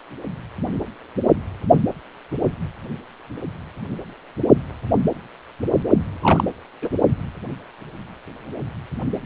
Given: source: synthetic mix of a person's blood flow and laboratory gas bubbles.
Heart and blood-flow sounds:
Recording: Doppler ultrasound of blood flow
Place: precordium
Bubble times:
6.21-6.44 s: bubbles
6.82-6.90 s: bubbles
From the record:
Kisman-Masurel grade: 212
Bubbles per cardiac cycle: several, 3 to 8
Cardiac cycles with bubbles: 1 to 10%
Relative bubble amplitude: moderate (0.250 to 0.450)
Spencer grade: 1 (occasional bubble signal discernible with the cardiac motion signal, with majority of cardiac periods free of bubbles)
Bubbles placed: only in the low amplitude regions of the cardiac cycle

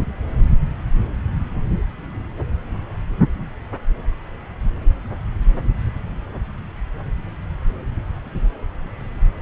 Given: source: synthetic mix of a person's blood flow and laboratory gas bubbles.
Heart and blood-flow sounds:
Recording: Doppler ultrasound of blood flow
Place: subclavian vein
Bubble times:
no bubbles
From the record:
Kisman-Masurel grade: 000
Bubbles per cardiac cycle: 0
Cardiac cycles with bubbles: 0%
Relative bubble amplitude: no bubbles discernible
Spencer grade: 0 (complete lack of bubble signals)

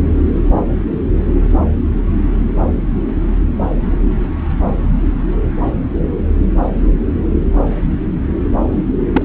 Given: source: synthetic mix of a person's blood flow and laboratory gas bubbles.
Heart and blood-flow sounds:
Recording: Doppler ultrasound of blood flow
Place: subclavian vein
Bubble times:
9.12-9.22 s: bubbles
From the record:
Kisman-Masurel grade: 113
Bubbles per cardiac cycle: 1 to 2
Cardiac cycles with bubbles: 1 to 10%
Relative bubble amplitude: loud (0.450 to 0.775)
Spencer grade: 1 (occasional bubble signal discernible with the cardiac motion signal, with majority of cardiac periods free of bubbles)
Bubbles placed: anywhere in the cardiac cycle

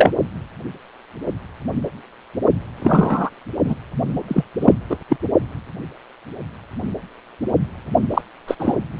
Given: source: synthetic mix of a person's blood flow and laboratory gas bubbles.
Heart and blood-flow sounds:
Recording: Doppler ultrasound of blood flow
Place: precordium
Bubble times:
0.00-0.11 s: bubbles
2.76-3.30 s: bubbles
3.64-3.74 s: bubbles
4.28-4.43 s: bubbles
4.61-4.72 s: bubbles
4.90-4.97 s: bubbles
5.09-5.17 s: bubbles
8.10-8.21 s: bubbles
8.47-8.55 s: bubbles
8.59-8.76 s: bubbles
From the record:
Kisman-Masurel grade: 233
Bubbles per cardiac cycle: several, 3 to 8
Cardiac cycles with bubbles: 50 to 99%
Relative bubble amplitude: loud (0.450 to 0.775)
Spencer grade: 3 (all of the cardiac periods contain showers or single bubble signals, but not dominating or overriding the cardiac motion signals)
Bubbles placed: only in the low amplitude regions of the cardiac cycle

